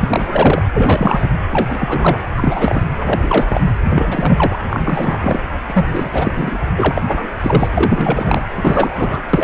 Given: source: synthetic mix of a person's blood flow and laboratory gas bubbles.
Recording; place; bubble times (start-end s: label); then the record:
Doppler ultrasound of blood flow; precordium
0.01-0.62 s: bubbles
0.73-1.28 s: bubbles
1.51-2.19 s: bubbles
2.37-2.88 s: bubbles
3.06-3.60 s: bubbles
3.91-4.59 s: bubbles
4.70-5.43 s: bubbles
5.68-5.86 s: bubbles
5.90-6.62 s: bubbles
6.77-7.02 s: bubbles
7.07-7.28 s: bubbles
7.43-7.68 s: bubbles
7.75-8.42 s: bubbles
8.55-9.20 s: bubbles
9.33-9.44 s: bubbles
From the record:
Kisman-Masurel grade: 343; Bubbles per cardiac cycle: rolling drumbeat, 9 or more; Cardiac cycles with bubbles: 100%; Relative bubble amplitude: loud (0.450 to 0.775); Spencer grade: 3 (all of the cardiac periods contain showers or single bubble signals, but not dominating or overriding the cardiac motion signals); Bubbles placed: anywhere in the cardiac cycle